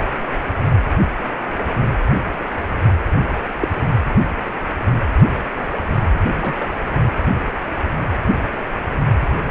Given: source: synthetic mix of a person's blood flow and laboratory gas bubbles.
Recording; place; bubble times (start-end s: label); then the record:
Doppler ultrasound of blood flow; precordium
3.33-3.40 s: bubbles
3.60-3.68 s: bubbles
6.41-6.56 s: bubbles
6.60-6.66 s: bubbles
From the record:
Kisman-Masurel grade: 122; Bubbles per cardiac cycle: 1 to 2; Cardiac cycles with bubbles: 10 to 50%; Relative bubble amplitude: moderate (0.250 to 0.450); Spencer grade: 2 (many but less than half of the cardiac periods contain bubble signals, singularly or in groups); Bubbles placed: anywhere in the cardiac cycle